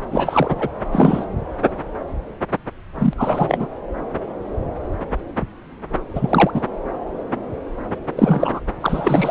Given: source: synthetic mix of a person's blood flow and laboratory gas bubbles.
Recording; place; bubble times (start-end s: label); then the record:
Doppler ultrasound of blood flow; subclavian vein
0.12-0.69 s: bubbles
0.92-1.25 s: bubbles
2.98-3.13 s: bubbles
3.17-3.67 s: bubbles
6.13-6.51 s: bubbles
6.54-6.65 s: bubbles
8.16-8.61 s: bubbles
8.81-9.31 s: bubbles
From the record:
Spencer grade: 3 (all of the cardiac periods contain showers or single bubble signals, but not dominating or overriding the cardiac motion signals); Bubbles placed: anywhere in the cardiac cycle